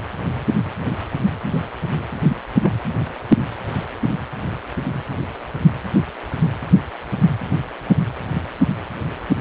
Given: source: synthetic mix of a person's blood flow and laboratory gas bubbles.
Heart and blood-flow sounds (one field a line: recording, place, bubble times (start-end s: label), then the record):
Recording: Doppler ultrasound of blood flow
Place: precordium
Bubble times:
2.29-2.35 s: bubbles
2.60-2.71 s: bubbles
From the record:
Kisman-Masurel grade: 112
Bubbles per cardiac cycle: 1 to 2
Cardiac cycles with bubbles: 1 to 10%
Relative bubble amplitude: moderate (0.250 to 0.450)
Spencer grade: 1 (occasional bubble signal discernible with the cardiac motion signal, with majority of cardiac periods free of bubbles)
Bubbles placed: anywhere in the cardiac cycle